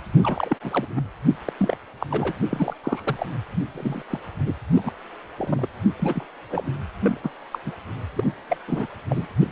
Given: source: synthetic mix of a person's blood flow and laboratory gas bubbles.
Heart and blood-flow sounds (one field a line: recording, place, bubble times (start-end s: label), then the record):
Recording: Doppler ultrasound of blood flow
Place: precordium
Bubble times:
0.24-0.56 s: bubbles
0.62-0.87 s: bubbles
0.95-1.01 s: bubbles
1.45-1.52 s: bubbles
1.59-1.77 s: bubbles
2.00-2.07 s: bubbles
2.10-2.32 s: bubbles
2.50-2.74 s: bubbles
2.84-3.26 s: bubbles
3.74-4.02 s: bubbles
4.09-4.19 s: bubbles
4.46-4.54 s: bubbles
4.73-4.92 s: bubbles
5.38-5.67 s: bubbles
5.99-6.26 s: bubbles
6.50-6.75 s: bubbles
7.03-7.17 s: bubbles
7.23-7.30 s: bubbles
7.52-7.58 s: bubbles
7.65-7.72 s: bubbles
8.16-8.24 s: bubbles
8.49-8.57 s: bubbles
8.68-8.87 s: bubbles
9.10-9.27 s: bubbles
9.39-9.47 s: bubbles
From the record:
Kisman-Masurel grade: 242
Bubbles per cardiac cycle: several, 3 to 8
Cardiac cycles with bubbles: 100%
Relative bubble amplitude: moderate (0.250 to 0.450)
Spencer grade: 3 (all of the cardiac periods contain showers or single bubble signals, but not dominating or overriding the cardiac motion signals)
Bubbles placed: anywhere in the cardiac cycle